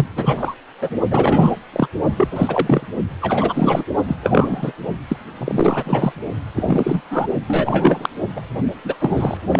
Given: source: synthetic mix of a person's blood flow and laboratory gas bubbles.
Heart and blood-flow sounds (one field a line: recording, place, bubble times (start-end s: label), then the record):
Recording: Doppler ultrasound of blood flow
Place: precordium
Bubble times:
0.00-0.07 s: bubbles
0.16-0.54 s: bubbles
0.80-0.90 s: bubbles
1.10-1.56 s: bubbles
1.72-1.88 s: bubbles
2.17-2.29 s: bubbles
2.31-2.86 s: bubbles
3.21-3.84 s: bubbles
4.07-4.16 s: bubbles
4.22-4.72 s: bubbles
5.08-5.17 s: bubbles
5.38-6.12 s: bubbles
6.55-7.01 s: bubbles
7.11-7.27 s: bubbles
7.47-8.09 s: bubbles
8.36-8.40 s: bubbles
8.84-8.95 s: bubbles
8.99-9.38 s: bubbles
9.48-9.60 s: bubbles
From the record:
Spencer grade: 3 (all of the cardiac periods contain showers or single bubble signals, but not dominating or overriding the cardiac motion signals)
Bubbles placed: only in the low amplitude regions of the cardiac cycle